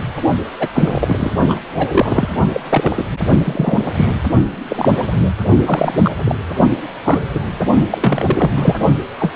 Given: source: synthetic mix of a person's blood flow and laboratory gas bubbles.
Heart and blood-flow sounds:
Doppler ultrasound of blood flow; precordium
0.59-0.69 s: bubbles
0.74-1.32 s: bubbles
1.49-1.60 s: bubbles
1.73-2.29 s: bubbles
2.53-2.60 s: bubbles
2.69-3.05 s: bubbles
3.44-3.79 s: bubbles
3.96-4.06 s: bubbles
4.69-4.91 s: bubbles
5.21-5.31 s: bubbles
5.65-6.11 s: bubbles
6.24-6.35 s: bubbles
7.04-7.21 s: bubbles
7.34-7.39 s: bubbles
7.90-8.51 s: bubbles
8.57-8.76 s: bubbles
9.20-9.32 s: bubbles
From the record:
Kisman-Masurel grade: 233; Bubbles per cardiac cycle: several, 3 to 8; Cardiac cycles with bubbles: 50 to 99%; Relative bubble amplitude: loud (0.450 to 0.775); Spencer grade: 3 (all of the cardiac periods contain showers or single bubble signals, but not dominating or overriding the cardiac motion signals); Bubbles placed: only in the low amplitude regions of the cardiac cycle

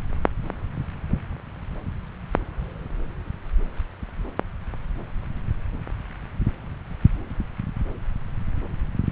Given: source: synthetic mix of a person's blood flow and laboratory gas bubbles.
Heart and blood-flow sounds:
Doppler ultrasound of blood flow; subclavian vein
no bubbles
From the record:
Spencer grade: 0 (complete lack of bubble signals)

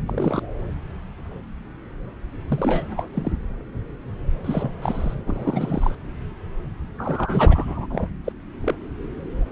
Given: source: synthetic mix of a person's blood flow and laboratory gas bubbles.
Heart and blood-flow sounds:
Doppler ultrasound of blood flow; subclavian vein
0.06-0.42 s: bubbles
2.48-3.07 s: bubbles
3.14-3.32 s: bubbles
4.44-4.72 s: bubbles
4.82-5.15 s: bubbles
5.27-5.95 s: bubbles
6.98-7.87 s: bubbles
7.90-8.07 s: bubbles
8.24-8.32 s: bubbles
8.60-8.74 s: bubbles
From the record:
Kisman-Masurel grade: 232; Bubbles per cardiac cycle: several, 3 to 8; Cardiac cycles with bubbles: 50 to 99%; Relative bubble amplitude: moderate (0.250 to 0.450); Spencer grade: 3 (all of the cardiac periods contain showers or single bubble signals, but not dominating or overriding the cardiac motion signals); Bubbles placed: anywhere in the cardiac cycle

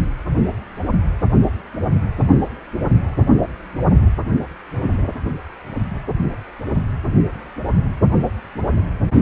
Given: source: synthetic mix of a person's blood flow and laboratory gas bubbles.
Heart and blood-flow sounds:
Doppler ultrasound of blood flow; precordium
3.18-3.26 s: bubbles
From the record:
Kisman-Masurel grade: 112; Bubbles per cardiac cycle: 1 to 2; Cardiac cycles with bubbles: 1 to 10%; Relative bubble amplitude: moderate (0.250 to 0.450); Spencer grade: 1 (occasional bubble signal discernible with the cardiac motion signal, with majority of cardiac periods free of bubbles); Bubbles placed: anywhere in the cardiac cycle

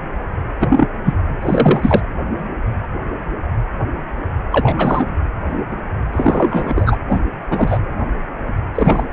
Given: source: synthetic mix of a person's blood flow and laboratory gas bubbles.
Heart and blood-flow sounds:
Doppler ultrasound of blood flow; precordium
0.60-0.87 s: bubbles
1.05-1.15 s: bubbles
1.41-2.00 s: bubbles
4.51-5.14 s: bubbles
6.12-6.97 s: bubbles
7.09-7.21 s: bubbles
7.50-7.78 s: bubbles
8.75-9.04 s: bubbles
From the record:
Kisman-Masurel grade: 233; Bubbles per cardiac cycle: several, 3 to 8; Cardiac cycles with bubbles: 50 to 99%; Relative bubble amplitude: loud (0.450 to 0.775); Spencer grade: 3 (all of the cardiac periods contain showers or single bubble signals, but not dominating or overriding the cardiac motion signals); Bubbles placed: anywhere in the cardiac cycle

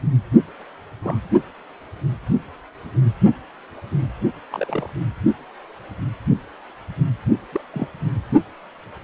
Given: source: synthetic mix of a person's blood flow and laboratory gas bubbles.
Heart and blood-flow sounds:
Doppler ultrasound of blood flow; precordium
1.03-1.19 s: bubbles
4.52-4.90 s: bubbles
7.52-7.61 s: bubbles
7.73-7.88 s: bubbles
From the record:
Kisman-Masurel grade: 121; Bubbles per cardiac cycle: 1 to 2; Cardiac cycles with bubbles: 10 to 50%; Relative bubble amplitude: barely perceptible (0.100 to 0.250); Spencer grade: 2 (many but less than half of the cardiac periods contain bubble signals, singularly or in groups); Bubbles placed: only in the low amplitude regions of the cardiac cycle

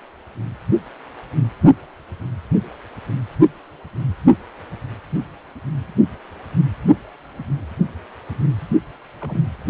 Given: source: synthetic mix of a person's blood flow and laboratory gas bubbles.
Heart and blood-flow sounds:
Doppler ultrasound of blood flow; precordium
9.21-9.39 s: bubbles
From the record:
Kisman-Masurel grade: 111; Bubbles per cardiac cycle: 1 to 2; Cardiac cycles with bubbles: 1 to 10%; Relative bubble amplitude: barely perceptible (0.100 to 0.250); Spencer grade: 1 (occasional bubble signal discernible with the cardiac motion signal, with majority of cardiac periods free of bubbles); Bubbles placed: only in the low amplitude regions of the cardiac cycle

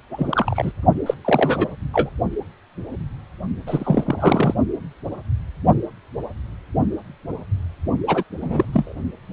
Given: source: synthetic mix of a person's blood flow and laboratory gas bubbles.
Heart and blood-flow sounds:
Doppler ultrasound of blood flow; precordium
0.11-0.72 s: bubbles
1.06-1.14 s: bubbles
1.25-1.73 s: bubbles
1.93-2.09 s: bubbles
3.66-4.54 s: bubbles
8.07-8.23 s: bubbles
8.40-8.65 s: bubbles
8.73-8.92 s: bubbles
From the record:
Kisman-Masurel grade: 222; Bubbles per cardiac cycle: several, 3 to 8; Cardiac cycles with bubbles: 10 to 50%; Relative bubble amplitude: moderate (0.250 to 0.450); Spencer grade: 2 (many but less than half of the cardiac periods contain bubble signals, singularly or in groups); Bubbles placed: only in the low amplitude regions of the cardiac cycle

